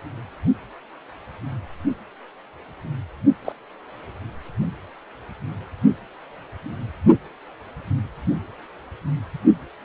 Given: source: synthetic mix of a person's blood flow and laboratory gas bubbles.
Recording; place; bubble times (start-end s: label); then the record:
Doppler ultrasound of blood flow; precordium
3.45-3.53 s: bubbles
From the record:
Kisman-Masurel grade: 122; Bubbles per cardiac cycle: 1 to 2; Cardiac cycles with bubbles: 10 to 50%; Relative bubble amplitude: moderate (0.250 to 0.450); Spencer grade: 2 (many but less than half of the cardiac periods contain bubble signals, singularly or in groups); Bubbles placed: only in the low amplitude regions of the cardiac cycle